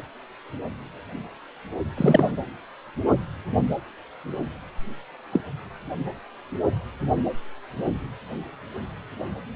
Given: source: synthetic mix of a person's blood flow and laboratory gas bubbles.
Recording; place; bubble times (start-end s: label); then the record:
Doppler ultrasound of blood flow; precordium
1.97-2.31 s: bubbles
5.31-5.41 s: bubbles
From the record:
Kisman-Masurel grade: 122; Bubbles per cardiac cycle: 1 to 2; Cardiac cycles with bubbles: 10 to 50%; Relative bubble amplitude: moderate (0.250 to 0.450); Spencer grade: 2 (many but less than half of the cardiac periods contain bubble signals, singularly or in groups); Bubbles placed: only in the low amplitude regions of the cardiac cycle